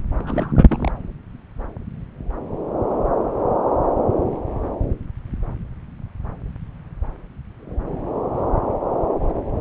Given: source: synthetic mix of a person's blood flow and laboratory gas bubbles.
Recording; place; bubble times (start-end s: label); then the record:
Doppler ultrasound of blood flow; subclavian vein
0.14-0.92 s: bubbles
From the record:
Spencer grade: 1 (occasional bubble signal discernible with the cardiac motion signal, with majority of cardiac periods free of bubbles); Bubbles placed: anywhere in the cardiac cycle